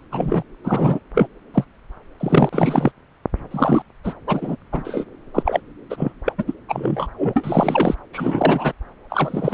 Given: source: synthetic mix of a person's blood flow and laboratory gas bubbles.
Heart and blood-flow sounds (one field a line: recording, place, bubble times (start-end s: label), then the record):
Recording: Doppler ultrasound of blood flow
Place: subclavian vein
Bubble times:
0.11-0.43 s: bubbles
0.64-0.99 s: bubbles
1.15-1.28 s: bubbles
1.54-1.65 s: bubbles
2.19-2.49 s: bubbles
2.52-2.92 s: bubbles
3.50-3.82 s: bubbles
4.04-4.13 s: bubbles
4.27-4.56 s: bubbles
4.72-5.04 s: bubbles
5.33-5.60 s: bubbles
5.89-6.12 s: bubbles
6.25-6.33 s: bubbles
6.38-6.44 s: bubbles
6.46-6.54 s: bubbles
6.68-7.07 s: bubbles
7.17-7.95 s: bubbles
8.13-8.72 s: bubbles
9.10-9.54 s: bubbles
From the record:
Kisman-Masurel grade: 243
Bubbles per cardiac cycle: several, 3 to 8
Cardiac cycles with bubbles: 100%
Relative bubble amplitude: loud (0.450 to 0.775)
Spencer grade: 3 (all of the cardiac periods contain showers or single bubble signals, but not dominating or overriding the cardiac motion signals)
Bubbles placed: anywhere in the cardiac cycle